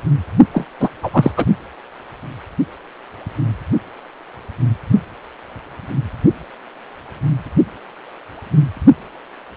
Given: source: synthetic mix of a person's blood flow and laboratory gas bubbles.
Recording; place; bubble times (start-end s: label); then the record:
Doppler ultrasound of blood flow; precordium
0.53-0.66 s: bubbles
0.80-0.89 s: bubbles
1.02-1.31 s: bubbles
1.37-1.45 s: bubbles
From the record:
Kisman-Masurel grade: 213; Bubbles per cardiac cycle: several, 3 to 8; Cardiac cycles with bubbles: 1 to 10%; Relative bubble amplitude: loud (0.450 to 0.775); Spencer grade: 1 (occasional bubble signal discernible with the cardiac motion signal, with majority of cardiac periods free of bubbles); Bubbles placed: only in the low amplitude regions of the cardiac cycle